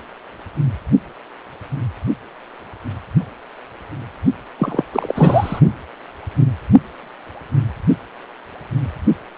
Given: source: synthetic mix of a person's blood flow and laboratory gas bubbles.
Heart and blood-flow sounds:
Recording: Doppler ultrasound of blood flow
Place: precordium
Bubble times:
4.58-4.83 s: bubbles
4.92-5.60 s: bubbles
From the record:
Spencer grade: 1 (occasional bubble signal discernible with the cardiac motion signal, with majority of cardiac periods free of bubbles)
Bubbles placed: only in the low amplitude regions of the cardiac cycle

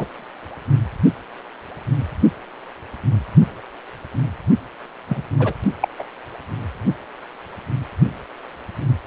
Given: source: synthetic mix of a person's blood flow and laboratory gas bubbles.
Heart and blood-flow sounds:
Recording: Doppler ultrasound of blood flow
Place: precordium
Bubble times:
0.00-0.06 s: bubbles
5.08-5.23 s: bubbles
5.39-5.54 s: bubbles
5.81-5.88 s: bubbles
5.98-6.04 s: bubbles
From the record:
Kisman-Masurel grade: 122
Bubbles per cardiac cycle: 1 to 2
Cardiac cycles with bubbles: 10 to 50%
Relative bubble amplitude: moderate (0.250 to 0.450)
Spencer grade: 2 (many but less than half of the cardiac periods contain bubble signals, singularly or in groups)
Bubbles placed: only in the low amplitude regions of the cardiac cycle

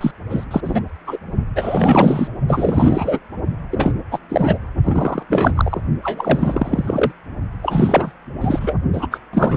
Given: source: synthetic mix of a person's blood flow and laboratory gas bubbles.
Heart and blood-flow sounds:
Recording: Doppler ultrasound of blood flow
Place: precordium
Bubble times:
0.01-0.11 s: bubbles
0.30-0.45 s: bubbles
0.51-0.60 s: bubbles
0.65-0.80 s: bubbles
1.06-1.18 s: bubbles
1.55-2.27 s: bubbles
2.47-3.19 s: bubbles
3.70-3.92 s: bubbles
4.11-4.19 s: bubbles
4.29-4.58 s: bubbles
4.83-5.23 s: bubbles
5.29-5.53 s: bubbles
5.56-5.81 s: bubbles
6.02-7.12 s: bubbles
7.62-8.12 s: bubbles
8.40-8.74 s: bubbles
8.93-9.08 s: bubbles
9.11-9.19 s: bubbles
9.33-9.57 s: bubbles
From the record:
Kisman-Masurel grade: 343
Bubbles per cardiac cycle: rolling drumbeat, 9 or more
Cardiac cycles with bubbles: 100%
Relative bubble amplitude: loud (0.450 to 0.775)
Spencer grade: 3 (all of the cardiac periods contain showers or single bubble signals, but not dominating or overriding the cardiac motion signals)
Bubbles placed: only in the low amplitude regions of the cardiac cycle

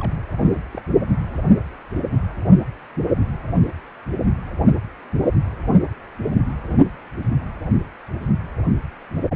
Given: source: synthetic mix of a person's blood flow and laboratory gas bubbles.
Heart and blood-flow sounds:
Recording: Doppler ultrasound of blood flow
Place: precordium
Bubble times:
0.00-0.15 s: bubbles
0.54-0.59 s: bubbles
0.72-0.81 s: bubbles
From the record:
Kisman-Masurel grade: 211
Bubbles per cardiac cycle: several, 3 to 8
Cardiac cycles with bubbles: 1 to 10%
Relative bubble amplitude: barely perceptible (0.100 to 0.250)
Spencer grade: 1 (occasional bubble signal discernible with the cardiac motion signal, with majority of cardiac periods free of bubbles)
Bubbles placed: only in the low amplitude regions of the cardiac cycle

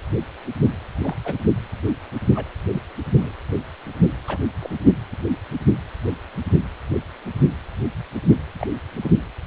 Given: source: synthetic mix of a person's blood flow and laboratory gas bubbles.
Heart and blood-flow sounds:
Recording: Doppler ultrasound of blood flow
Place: precordium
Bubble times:
1.02-1.16 s: bubbles
1.24-1.35 s: bubbles
2.35-2.46 s: bubbles
2.70-2.82 s: bubbles
3.16-3.32 s: bubbles
4.27-4.38 s: bubbles
4.60-4.70 s: bubbles
8.58-8.67 s: bubbles
9.02-9.12 s: bubbles
From the record:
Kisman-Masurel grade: 122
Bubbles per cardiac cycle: 1 to 2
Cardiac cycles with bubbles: 10 to 50%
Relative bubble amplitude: moderate (0.250 to 0.450)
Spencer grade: 2 (many but less than half of the cardiac periods contain bubble signals, singularly or in groups)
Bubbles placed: anywhere in the cardiac cycle

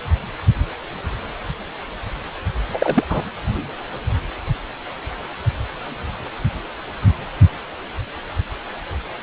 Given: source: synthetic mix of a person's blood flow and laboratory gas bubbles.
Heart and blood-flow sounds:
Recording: Doppler ultrasound of blood flow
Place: precordium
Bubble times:
2.68-3.04 s: bubbles
3.09-3.21 s: bubbles
From the record:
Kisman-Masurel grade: 223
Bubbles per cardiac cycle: several, 3 to 8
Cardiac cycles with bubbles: 10 to 50%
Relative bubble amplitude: loud (0.450 to 0.775)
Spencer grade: 2 (many but less than half of the cardiac periods contain bubble signals, singularly or in groups)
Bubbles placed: only in the low amplitude regions of the cardiac cycle

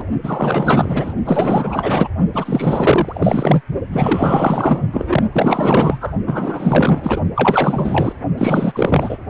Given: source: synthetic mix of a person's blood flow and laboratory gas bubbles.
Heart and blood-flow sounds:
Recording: Doppler ultrasound of blood flow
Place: precordium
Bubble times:
0.00-0.04 s: bubbles
0.23-1.15 s: bubbles
1.24-2.08 s: bubbles
2.33-3.61 s: bubbles
3.92-4.83 s: bubbles
4.92-5.24 s: bubbles
5.32-6.14 s: bubbles
6.26-7.20 s: bubbles
7.35-8.17 s: bubbles
8.38-9.18 s: bubbles
From the record:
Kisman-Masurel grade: 444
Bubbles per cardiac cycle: continuous sound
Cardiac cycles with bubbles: 100%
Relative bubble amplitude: maximal (0.775 to 0.999)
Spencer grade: 4 (maximum detectable bubble signal sounding continuously throughout systole and diastole of every cardiac period, and overriding the amplitude of the normal cardiac signals)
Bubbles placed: only in the low amplitude regions of the cardiac cycle

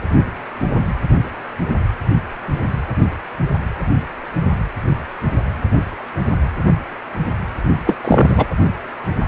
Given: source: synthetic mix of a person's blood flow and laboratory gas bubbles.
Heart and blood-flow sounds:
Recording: Doppler ultrasound of blood flow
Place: precordium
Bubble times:
7.85-7.94 s: bubbles
8.02-8.46 s: bubbles
From the record:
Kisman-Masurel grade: 213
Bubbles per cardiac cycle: several, 3 to 8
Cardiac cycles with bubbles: 1 to 10%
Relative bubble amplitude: loud (0.450 to 0.775)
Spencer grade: 1 (occasional bubble signal discernible with the cardiac motion signal, with majority of cardiac periods free of bubbles)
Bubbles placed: only in the low amplitude regions of the cardiac cycle

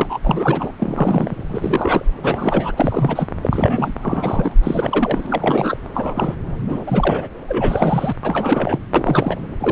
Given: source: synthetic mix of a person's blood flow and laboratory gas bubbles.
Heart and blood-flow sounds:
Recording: Doppler ultrasound of blood flow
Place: subclavian vein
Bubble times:
0.00-0.19 s: bubbles
0.23-0.72 s: bubbles
0.79-1.34 s: bubbles
1.49-2.05 s: bubbles
2.23-2.72 s: bubbles
2.76-3.27 s: bubbles
3.42-3.92 s: bubbles
4.03-4.54 s: bubbles
4.63-5.78 s: bubbles
5.93-6.35 s: bubbles
6.68-6.80 s: bubbles
6.87-7.28 s: bubbles
7.48-8.14 s: bubbles
8.23-8.78 s: bubbles
8.94-9.36 s: bubbles
9.58-9.72 s: bubbles
From the record:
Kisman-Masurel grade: 342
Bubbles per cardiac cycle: rolling drumbeat, 9 or more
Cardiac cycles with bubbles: 100%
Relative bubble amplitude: moderate (0.250 to 0.450)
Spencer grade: 3 (all of the cardiac periods contain showers or single bubble signals, but not dominating or overriding the cardiac motion signals)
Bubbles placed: anywhere in the cardiac cycle

